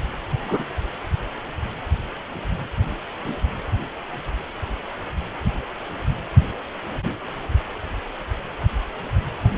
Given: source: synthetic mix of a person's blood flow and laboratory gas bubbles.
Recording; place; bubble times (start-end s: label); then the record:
Doppler ultrasound of blood flow; precordium
0.42-0.65 s: bubbles
From the record:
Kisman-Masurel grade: 122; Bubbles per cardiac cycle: 1 to 2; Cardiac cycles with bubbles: 10 to 50%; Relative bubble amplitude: moderate (0.250 to 0.450); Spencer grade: 2 (many but less than half of the cardiac periods contain bubble signals, singularly or in groups); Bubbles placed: anywhere in the cardiac cycle